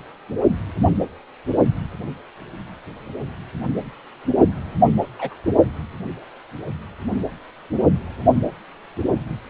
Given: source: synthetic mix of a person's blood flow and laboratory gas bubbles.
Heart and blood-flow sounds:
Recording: Doppler ultrasound of blood flow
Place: precordium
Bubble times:
5.18-5.34 s: bubbles
From the record:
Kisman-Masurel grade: 122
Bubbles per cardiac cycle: 1 to 2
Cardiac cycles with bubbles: 10 to 50%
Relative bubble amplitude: moderate (0.250 to 0.450)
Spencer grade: 2 (many but less than half of the cardiac periods contain bubble signals, singularly or in groups)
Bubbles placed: only in the low amplitude regions of the cardiac cycle

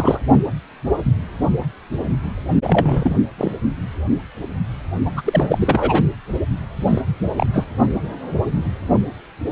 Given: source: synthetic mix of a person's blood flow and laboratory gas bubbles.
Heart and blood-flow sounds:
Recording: Doppler ultrasound of blood flow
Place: precordium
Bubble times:
0.00-0.21 s: bubbles
2.63-3.16 s: bubbles
3.38-3.52 s: bubbles
5.05-5.21 s: bubbles
5.25-6.06 s: bubbles
6.88-7.02 s: bubbles
7.38-7.46 s: bubbles
7.54-7.67 s: bubbles
From the record:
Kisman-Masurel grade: 223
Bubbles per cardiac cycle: several, 3 to 8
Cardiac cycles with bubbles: 10 to 50%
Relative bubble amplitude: loud (0.450 to 0.775)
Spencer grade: 2 (many but less than half of the cardiac periods contain bubble signals, singularly or in groups)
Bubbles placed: only in the low amplitude regions of the cardiac cycle

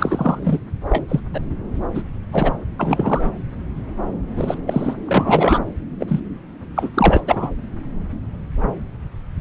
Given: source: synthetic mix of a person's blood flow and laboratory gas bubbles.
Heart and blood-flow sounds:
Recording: Doppler ultrasound of blood flow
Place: subclavian vein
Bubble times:
0.00-0.59 s: bubbles
0.89-1.05 s: bubbles
1.08-1.21 s: bubbles
1.33-1.41 s: bubbles
1.94-2.02 s: bubbles
2.31-2.52 s: bubbles
2.79-3.31 s: bubbles
4.36-4.56 s: bubbles
4.66-4.94 s: bubbles
5.06-5.60 s: bubbles
5.99-6.20 s: bubbles
6.75-6.90 s: bubbles
6.94-7.24 s: bubbles
7.27-7.55 s: bubbles
From the record:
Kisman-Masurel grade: 233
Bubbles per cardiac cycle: several, 3 to 8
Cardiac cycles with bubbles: 50 to 99%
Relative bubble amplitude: loud (0.450 to 0.775)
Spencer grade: 3 (all of the cardiac periods contain showers or single bubble signals, but not dominating or overriding the cardiac motion signals)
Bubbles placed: anywhere in the cardiac cycle

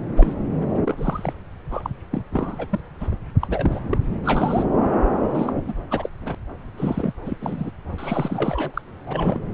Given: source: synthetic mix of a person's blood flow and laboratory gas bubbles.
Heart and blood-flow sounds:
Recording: Doppler ultrasound of blood flow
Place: subclavian vein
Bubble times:
0.16-0.35 s: bubbles
0.74-0.79 s: bubbles
0.84-1.33 s: bubbles
1.71-1.90 s: bubbles
2.11-2.23 s: bubbles
2.31-2.55 s: bubbles
2.58-2.66 s: bubbles
2.69-2.80 s: bubbles
3.00-3.08 s: bubbles
3.10-3.16 s: bubbles
3.41-3.80 s: bubbles
3.89-3.97 s: bubbles
4.24-4.65 s: bubbles
4.80-4.96 s: bubbles
5.29-5.53 s: bubbles
5.66-5.74 s: bubbles
5.90-6.09 s: bubbles
6.21-6.35 s: bubbles
6.77-7.13 s: bubbles
7.25-7.37 s: bubbles
7.41-7.70 s: bubbles
7.98-8.81 s: bubbles
9.06-9.43 s: bubbles
From the record:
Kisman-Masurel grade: 242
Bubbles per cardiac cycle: several, 3 to 8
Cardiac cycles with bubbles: 100%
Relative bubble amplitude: moderate (0.250 to 0.450)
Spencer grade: 3 (all of the cardiac periods contain showers or single bubble signals, but not dominating or overriding the cardiac motion signals)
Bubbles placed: anywhere in the cardiac cycle

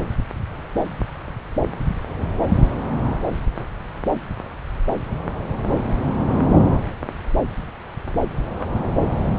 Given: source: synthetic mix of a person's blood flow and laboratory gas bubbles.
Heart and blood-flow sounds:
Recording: Doppler ultrasound of blood flow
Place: subclavian vein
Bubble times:
no bubbles
From the record:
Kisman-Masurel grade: 000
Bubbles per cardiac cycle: 0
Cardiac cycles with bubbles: 0%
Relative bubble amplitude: no bubbles discernible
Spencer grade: 0 (complete lack of bubble signals)

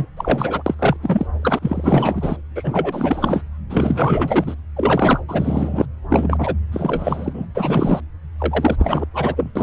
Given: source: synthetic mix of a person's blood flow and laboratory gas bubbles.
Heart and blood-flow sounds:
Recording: Doppler ultrasound of blood flow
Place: subclavian vein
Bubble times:
0.00-0.06 s: bubbles
0.17-0.62 s: bubbles
0.66-0.74 s: bubbles
0.79-0.96 s: bubbles
1.02-1.27 s: bubbles
1.41-1.59 s: bubbles
1.61-2.37 s: bubbles
2.55-3.44 s: bubbles
3.69-4.55 s: bubbles
4.76-5.20 s: bubbles
5.28-5.86 s: bubbles
6.09-6.54 s: bubbles
6.72-7.46 s: bubbles
7.55-8.00 s: bubbles
8.38-8.76 s: bubbles
8.79-9.05 s: bubbles
9.13-9.52 s: bubbles
9.55-9.63 s: bubbles
From the record:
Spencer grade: 4 (maximum detectable bubble signal sounding continuously throughout systole and diastole of every cardiac period, and overriding the amplitude of the normal cardiac signals)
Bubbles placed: anywhere in the cardiac cycle

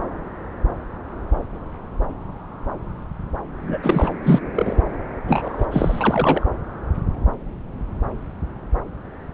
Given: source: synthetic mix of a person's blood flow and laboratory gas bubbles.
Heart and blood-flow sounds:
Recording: Doppler ultrasound of blood flow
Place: subclavian vein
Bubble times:
3.67-3.78 s: bubbles
3.82-4.12 s: bubbles
4.23-4.40 s: bubbles
4.55-4.81 s: bubbles
5.28-5.67 s: bubbles
5.71-6.46 s: bubbles
From the record:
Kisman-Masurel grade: 222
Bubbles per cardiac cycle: several, 3 to 8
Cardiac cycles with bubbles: 10 to 50%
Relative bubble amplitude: moderate (0.250 to 0.450)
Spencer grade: 2 (many but less than half of the cardiac periods contain bubble signals, singularly or in groups)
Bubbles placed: anywhere in the cardiac cycle

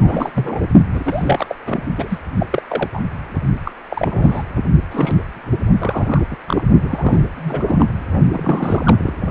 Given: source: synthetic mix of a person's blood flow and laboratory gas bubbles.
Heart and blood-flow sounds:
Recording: Doppler ultrasound of blood flow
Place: precordium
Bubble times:
0.00-0.30 s: bubbles
0.34-0.60 s: bubbles
0.92-1.46 s: bubbles
1.49-1.54 s: bubbles
1.66-1.83 s: bubbles
1.97-2.19 s: bubbles
2.40-2.46 s: bubbles
2.50-2.62 s: bubbles
2.68-2.89 s: bubbles
2.94-3.00 s: bubbles
3.65-3.72 s: bubbles
3.90-4.43 s: bubbles
4.91-5.15 s: bubbles
5.79-6.25 s: bubbles
6.30-6.36 s: bubbles
6.48-6.62 s: bubbles
6.83-7.26 s: bubbles
7.36-7.87 s: bubbles
8.30-9.13 s: bubbles
From the record:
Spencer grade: 3 (all of the cardiac periods contain showers or single bubble signals, but not dominating or overriding the cardiac motion signals)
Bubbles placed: only in the low amplitude regions of the cardiac cycle

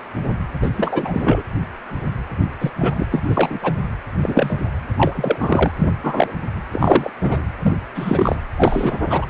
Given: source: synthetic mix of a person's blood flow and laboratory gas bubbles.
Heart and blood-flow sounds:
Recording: Doppler ultrasound of blood flow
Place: precordium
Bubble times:
0.61-0.70 s: bubbles
0.77-1.43 s: bubbles
2.60-2.71 s: bubbles
2.79-3.06 s: bubbles
3.11-3.20 s: bubbles
3.24-3.74 s: bubbles
4.23-4.58 s: bubbles
4.96-5.71 s: bubbles
5.79-5.88 s: bubbles
6.02-6.33 s: bubbles
6.72-7.11 s: bubbles
7.20-7.44 s: bubbles
7.62-7.74 s: bubbles
7.95-8.42 s: bubbles
8.56-9.26 s: bubbles
From the record:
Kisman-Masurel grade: 233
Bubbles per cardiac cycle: several, 3 to 8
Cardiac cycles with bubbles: 50 to 99%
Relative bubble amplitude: loud (0.450 to 0.775)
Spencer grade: 3 (all of the cardiac periods contain showers or single bubble signals, but not dominating or overriding the cardiac motion signals)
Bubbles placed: anywhere in the cardiac cycle

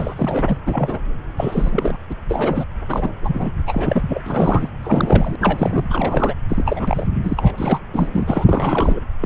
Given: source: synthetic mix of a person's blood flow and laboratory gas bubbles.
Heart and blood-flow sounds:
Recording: Doppler ultrasound of blood flow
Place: subclavian vein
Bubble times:
0.00-0.15 s: bubbles
0.17-0.58 s: bubbles
0.67-0.99 s: bubbles
1.37-1.98 s: bubbles
2.10-2.12 s: bubbles
2.29-2.65 s: bubbles
2.88-3.10 s: bubbles
3.21-3.50 s: bubbles
3.67-4.21 s: bubbles
4.24-4.69 s: bubbles
4.82-5.36 s: bubbles
5.40-5.86 s: bubbles
5.89-6.34 s: bubbles
6.49-7.07 s: bubbles
7.23-7.81 s: bubbles
7.93-8.09 s: bubbles
8.13-9.00 s: bubbles
9.21-9.26 s: bubbles
From the record:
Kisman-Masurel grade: 342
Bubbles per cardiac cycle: rolling drumbeat, 9 or more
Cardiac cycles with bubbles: 100%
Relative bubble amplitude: moderate (0.250 to 0.450)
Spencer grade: 3 (all of the cardiac periods contain showers or single bubble signals, but not dominating or overriding the cardiac motion signals)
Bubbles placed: anywhere in the cardiac cycle

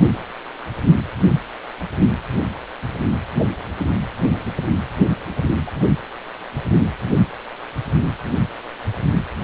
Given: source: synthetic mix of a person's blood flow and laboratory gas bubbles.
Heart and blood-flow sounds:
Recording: Doppler ultrasound of blood flow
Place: precordium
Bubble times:
5.67-5.71 s: bubbles
From the record:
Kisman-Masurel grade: 121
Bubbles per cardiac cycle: 1 to 2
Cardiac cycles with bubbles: 10 to 50%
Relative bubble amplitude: barely perceptible (0.100 to 0.250)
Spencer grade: 2 (many but less than half of the cardiac periods contain bubble signals, singularly or in groups)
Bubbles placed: anywhere in the cardiac cycle

